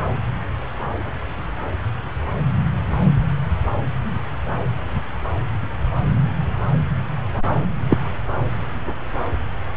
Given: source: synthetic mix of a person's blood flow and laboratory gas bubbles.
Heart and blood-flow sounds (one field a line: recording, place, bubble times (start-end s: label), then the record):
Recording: Doppler ultrasound of blood flow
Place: subclavian vein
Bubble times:
7.89-7.97 s: bubbles
From the record:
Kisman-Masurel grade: 113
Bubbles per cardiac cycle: 1 to 2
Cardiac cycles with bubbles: 1 to 10%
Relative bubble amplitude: loud (0.450 to 0.775)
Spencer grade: 1 (occasional bubble signal discernible with the cardiac motion signal, with majority of cardiac periods free of bubbles)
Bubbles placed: anywhere in the cardiac cycle